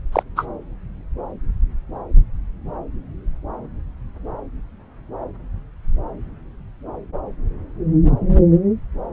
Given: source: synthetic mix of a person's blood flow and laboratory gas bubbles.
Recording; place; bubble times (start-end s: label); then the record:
Doppler ultrasound of blood flow; subclavian vein
0.12-0.23 s: bubbles
0.35-0.46 s: bubbles
From the record:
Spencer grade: 1 (occasional bubble signal discernible with the cardiac motion signal, with majority of cardiac periods free of bubbles); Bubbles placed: anywhere in the cardiac cycle